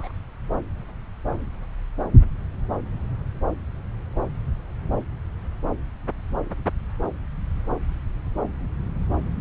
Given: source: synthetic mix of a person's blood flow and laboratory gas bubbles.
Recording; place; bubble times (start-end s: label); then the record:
Doppler ultrasound of blood flow; subclavian vein
0.00-0.11 s: bubbles
From the record:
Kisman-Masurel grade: 111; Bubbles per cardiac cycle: 1 to 2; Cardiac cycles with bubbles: 1 to 10%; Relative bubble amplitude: barely perceptible (0.100 to 0.250); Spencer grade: 1 (occasional bubble signal discernible with the cardiac motion signal, with majority of cardiac periods free of bubbles); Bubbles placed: anywhere in the cardiac cycle